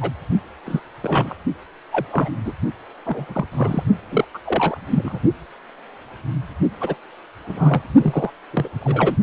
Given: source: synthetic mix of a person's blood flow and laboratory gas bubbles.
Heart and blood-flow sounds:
Doppler ultrasound of blood flow; precordium
0.01-0.11 s: bubbles
0.65-0.80 s: bubbles
1.02-1.34 s: bubbles
1.92-2.06 s: bubbles
2.12-2.29 s: bubbles
2.45-2.52 s: bubbles
3.04-3.47 s: bubbles
3.52-3.84 s: bubbles
4.11-4.25 s: bubbles
4.34-4.38 s: bubbles
4.45-4.77 s: bubbles
4.90-5.19 s: bubbles
6.80-6.95 s: bubbles
7.46-7.82 s: bubbles
8.01-8.33 s: bubbles
8.53-8.68 s: bubbles
8.81-9.16 s: bubbles
From the record:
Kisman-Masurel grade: 232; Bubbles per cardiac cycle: several, 3 to 8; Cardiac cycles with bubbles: 50 to 99%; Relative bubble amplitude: moderate (0.250 to 0.450); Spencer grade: 3 (all of the cardiac periods contain showers or single bubble signals, but not dominating or overriding the cardiac motion signals); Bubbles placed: only in the low amplitude regions of the cardiac cycle

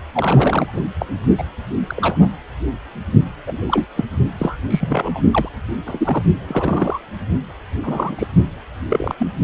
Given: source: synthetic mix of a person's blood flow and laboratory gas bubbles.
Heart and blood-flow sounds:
Doppler ultrasound of blood flow; precordium
0.13-0.82 s: bubbles
1.00-1.06 s: bubbles
1.38-1.44 s: bubbles
1.89-2.36 s: bubbles
3.46-3.58 s: bubbles
3.67-3.86 s: bubbles
3.96-4.04 s: bubbles
4.38-4.57 s: bubbles
4.70-5.21 s: bubbles
5.31-5.49 s: bubbles
5.86-6.23 s: bubbles
6.47-6.99 s: bubbles
7.83-8.15 s: bubbles
8.18-8.27 s: bubbles
8.89-9.15 s: bubbles
9.19-9.27 s: bubbles
From the record:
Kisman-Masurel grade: 242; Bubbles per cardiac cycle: several, 3 to 8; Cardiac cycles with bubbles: 100%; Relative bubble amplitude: moderate (0.250 to 0.450); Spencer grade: 3 (all of the cardiac periods contain showers or single bubble signals, but not dominating or overriding the cardiac motion signals); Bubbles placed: only in the low amplitude regions of the cardiac cycle

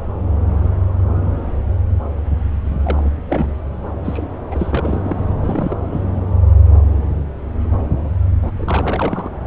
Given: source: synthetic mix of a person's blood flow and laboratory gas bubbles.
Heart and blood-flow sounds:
Doppler ultrasound of blood flow; subclavian vein
2.65-3.15 s: bubbles
3.27-3.52 s: bubbles
4.04-4.27 s: bubbles
4.51-5.36 s: bubbles
5.42-5.78 s: bubbles
5.91-6.02 s: bubbles
8.42-8.52 s: bubbles
8.58-9.29 s: bubbles
From the record:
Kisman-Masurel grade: 332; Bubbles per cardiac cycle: rolling drumbeat, 9 or more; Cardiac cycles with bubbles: 50 to 99%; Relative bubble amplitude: moderate (0.250 to 0.450); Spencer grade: 3 (all of the cardiac periods contain showers or single bubble signals, but not dominating or overriding the cardiac motion signals); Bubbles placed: anywhere in the cardiac cycle

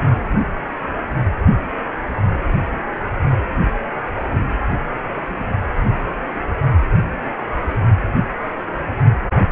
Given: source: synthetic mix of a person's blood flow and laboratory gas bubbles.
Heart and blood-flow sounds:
Doppler ultrasound of blood flow; precordium
no bubbles
From the record:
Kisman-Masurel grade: 000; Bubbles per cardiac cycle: 0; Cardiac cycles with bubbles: 0%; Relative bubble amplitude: no bubbles discernible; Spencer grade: 0 (complete lack of bubble signals)

